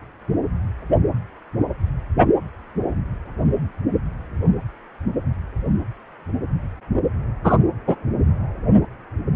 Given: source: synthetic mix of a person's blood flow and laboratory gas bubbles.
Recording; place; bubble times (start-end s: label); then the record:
Doppler ultrasound of blood flow; precordium
7.44-7.58 s: bubbles
7.87-7.96 s: bubbles
From the record:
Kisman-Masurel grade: 113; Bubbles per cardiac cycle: 1 to 2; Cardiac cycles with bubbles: 1 to 10%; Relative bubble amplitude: loud (0.450 to 0.775); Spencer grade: 1 (occasional bubble signal discernible with the cardiac motion signal, with majority of cardiac periods free of bubbles); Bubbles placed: anywhere in the cardiac cycle